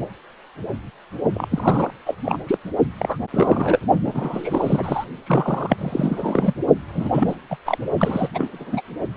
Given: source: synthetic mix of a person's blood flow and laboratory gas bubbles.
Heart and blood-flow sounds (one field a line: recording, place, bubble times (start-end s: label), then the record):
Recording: Doppler ultrasound of blood flow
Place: precordium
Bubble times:
1.34-1.48 s: bubbles
1.51-1.91 s: bubbles
2.06-2.15 s: bubbles
2.25-2.39 s: bubbles
2.46-2.58 s: bubbles
2.98-3.17 s: bubbles
3.30-3.79 s: bubbles
4.03-5.04 s: bubbles
5.27-6.54 s: bubbles
6.93-7.10 s: bubbles
7.12-7.36 s: bubbles
7.50-7.57 s: bubbles
7.66-7.78 s: bubbles
7.97-8.28 s: bubbles
8.34-8.81 s: bubbles
From the record:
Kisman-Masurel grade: 332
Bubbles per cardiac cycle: rolling drumbeat, 9 or more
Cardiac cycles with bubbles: 50 to 99%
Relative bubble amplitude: moderate (0.250 to 0.450)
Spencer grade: 3 (all of the cardiac periods contain showers or single bubble signals, but not dominating or overriding the cardiac motion signals)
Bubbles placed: only in the low amplitude regions of the cardiac cycle